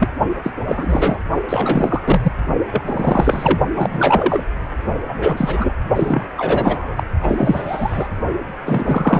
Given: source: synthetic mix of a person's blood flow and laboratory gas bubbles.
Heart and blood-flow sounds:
Doppler ultrasound of blood flow; precordium
0.00-0.08 s: bubbles
0.43-0.53 s: bubbles
0.67-1.18 s: bubbles
1.48-2.32 s: bubbles
2.71-2.81 s: bubbles
2.86-3.59 s: bubbles
3.73-4.44 s: bubbles
5.08-5.75 s: bubbles
5.96-6.25 s: bubbles
6.37-7.04 s: bubbles
7.22-8.09 s: bubbles
8.64-9.20 s: bubbles
From the record:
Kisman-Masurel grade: 343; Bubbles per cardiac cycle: rolling drumbeat, 9 or more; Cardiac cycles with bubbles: 100%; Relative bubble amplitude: loud (0.450 to 0.775); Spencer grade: 3 (all of the cardiac periods contain showers or single bubble signals, but not dominating or overriding the cardiac motion signals); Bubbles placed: only in the low amplitude regions of the cardiac cycle

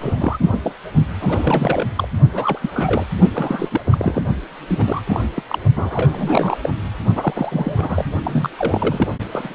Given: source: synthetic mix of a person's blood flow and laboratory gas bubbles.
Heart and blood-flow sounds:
Doppler ultrasound of blood flow; precordium
0.00-0.38 s: bubbles
0.41-0.60 s: bubbles
0.63-0.73 s: bubbles
1.19-1.87 s: bubbles
1.96-2.08 s: bubbles
2.32-3.06 s: bubbles
3.35-3.81 s: bubbles
3.85-4.22 s: bubbles
4.67-5.02 s: bubbles
5.07-5.21 s: bubbles
5.36-5.42 s: bubbles
5.49-5.58 s: bubbles
5.76-6.59 s: bubbles
6.63-6.70 s: bubbles
7.15-8.06 s: bubbles
8.22-8.50 s: bubbles
8.57-9.12 s: bubbles
9.31-9.54 s: bubbles
From the record:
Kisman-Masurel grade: 342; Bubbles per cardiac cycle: rolling drumbeat, 9 or more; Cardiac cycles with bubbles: 100%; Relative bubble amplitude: moderate (0.250 to 0.450); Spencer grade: 3 (all of the cardiac periods contain showers or single bubble signals, but not dominating or overriding the cardiac motion signals); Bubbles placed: only in the low amplitude regions of the cardiac cycle

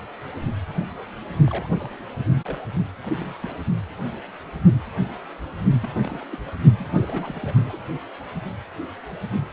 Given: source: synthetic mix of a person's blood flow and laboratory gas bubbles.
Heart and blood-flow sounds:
Doppler ultrasound of blood flow; precordium
1.48-1.67 s: bubbles
1.75-1.90 s: bubbles
2.45-2.67 s: bubbles
3.02-3.33 s: bubbles
3.42-3.60 s: bubbles
5.82-5.88 s: bubbles
6.04-6.18 s: bubbles
6.31-6.36 s: bubbles
6.79-7.76 s: bubbles
From the record:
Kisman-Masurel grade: 221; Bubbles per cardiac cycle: several, 3 to 8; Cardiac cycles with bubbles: 10 to 50%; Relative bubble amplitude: barely perceptible (0.100 to 0.250); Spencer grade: 2 (many but less than half of the cardiac periods contain bubble signals, singularly or in groups); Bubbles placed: only in the low amplitude regions of the cardiac cycle

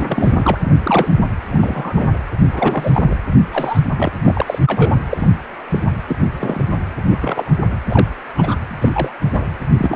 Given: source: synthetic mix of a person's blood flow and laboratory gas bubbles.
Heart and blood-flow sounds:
Doppler ultrasound of blood flow; precordium
0.00-0.57 s: bubbles
0.61-1.08 s: bubbles
1.49-2.08 s: bubbles
2.54-3.15 s: bubbles
3.53-3.80 s: bubbles
3.96-4.12 s: bubbles
4.24-4.58 s: bubbles
4.67-4.93 s: bubbles
5.10-5.27 s: bubbles
5.71-5.79 s: bubbles
6.08-6.17 s: bubbles
6.39-6.65 s: bubbles
7.10-7.18 s: bubbles
7.21-7.52 s: bubbles
7.89-8.07 s: bubbles
8.35-8.56 s: bubbles
8.68-9.11 s: bubbles
9.33-9.46 s: bubbles
9.77-9.96 s: bubbles
From the record:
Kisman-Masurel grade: 242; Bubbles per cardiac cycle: several, 3 to 8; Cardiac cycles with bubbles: 100%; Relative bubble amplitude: moderate (0.250 to 0.450); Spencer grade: 3 (all of the cardiac periods contain showers or single bubble signals, but not dominating or overriding the cardiac motion signals); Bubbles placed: anywhere in the cardiac cycle

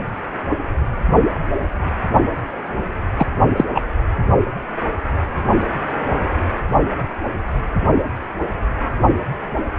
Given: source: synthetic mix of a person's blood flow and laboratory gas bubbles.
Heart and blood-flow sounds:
Doppler ultrasound of blood flow; precordium
3.17-3.27 s: bubbles
3.56-3.65 s: bubbles
3.75-3.81 s: bubbles
From the record:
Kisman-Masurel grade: 213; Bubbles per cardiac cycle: several, 3 to 8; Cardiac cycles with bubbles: 1 to 10%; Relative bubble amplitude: loud (0.450 to 0.775); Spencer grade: 1 (occasional bubble signal discernible with the cardiac motion signal, with majority of cardiac periods free of bubbles); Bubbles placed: anywhere in the cardiac cycle

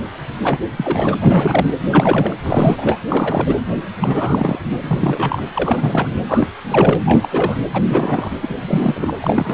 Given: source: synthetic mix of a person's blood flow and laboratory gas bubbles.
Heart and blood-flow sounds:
Doppler ultrasound of blood flow; precordium
0.42-0.59 s: bubbles
0.77-1.14 s: bubbles
1.19-1.74 s: bubbles
1.86-2.36 s: bubbles
2.42-2.99 s: bubbles
3.08-3.56 s: bubbles
4.01-4.59 s: bubbles
4.62-4.79 s: bubbles
4.82-5.42 s: bubbles
5.55-6.08 s: bubbles
6.28-6.48 s: bubbles
6.64-6.96 s: bubbles
7.04-7.59 s: bubbles
7.73-8.31 s: bubbles
8.42-8.55 s: bubbles
8.66-9.13 s: bubbles
9.22-9.54 s: bubbles
From the record:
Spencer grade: 3 (all of the cardiac periods contain showers or single bubble signals, but not dominating or overriding the cardiac motion signals); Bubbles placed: anywhere in the cardiac cycle

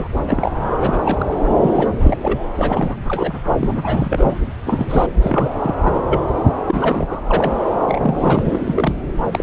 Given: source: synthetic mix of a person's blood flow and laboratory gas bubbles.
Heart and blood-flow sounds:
Doppler ultrasound of blood flow; subclavian vein
0.00-0.08 s: bubbles
0.27-0.51 s: bubbles
0.80-0.98 s: bubbles
1.05-1.25 s: bubbles
1.30-1.36 s: bubbles
1.62-1.88 s: bubbles
2.00-2.17 s: bubbles
2.23-2.39 s: bubbles
2.56-2.97 s: bubbles
3.07-3.33 s: bubbles
3.58-4.35 s: bubbles
4.67-5.06 s: bubbles
5.21-5.50 s: bubbles
5.60-5.75 s: bubbles
5.84-6.03 s: bubbles
6.08-6.20 s: bubbles
6.67-7.19 s: bubbles
7.27-7.53 s: bubbles
7.86-8.43 s: bubbles
8.45-8.95 s: bubbles
9.31-9.43 s: bubbles
From the record:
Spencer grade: 3 (all of the cardiac periods contain showers or single bubble signals, but not dominating or overriding the cardiac motion signals); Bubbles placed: anywhere in the cardiac cycle

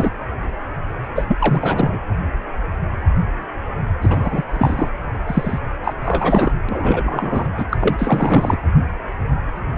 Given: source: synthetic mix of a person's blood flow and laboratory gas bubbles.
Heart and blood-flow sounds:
Doppler ultrasound of blood flow; precordium
0.00-0.10 s: bubbles
1.15-1.98 s: bubbles
4.02-4.45 s: bubbles
4.53-4.91 s: bubbles
5.27-5.59 s: bubbles
5.84-5.94 s: bubbles
6.04-6.52 s: bubbles
6.69-7.48 s: bubbles
7.58-8.58 s: bubbles
From the record:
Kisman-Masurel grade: 333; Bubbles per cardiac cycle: rolling drumbeat, 9 or more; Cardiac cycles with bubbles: 50 to 99%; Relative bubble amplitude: loud (0.450 to 0.775); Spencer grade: 3 (all of the cardiac periods contain showers or single bubble signals, but not dominating or overriding the cardiac motion signals); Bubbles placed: anywhere in the cardiac cycle

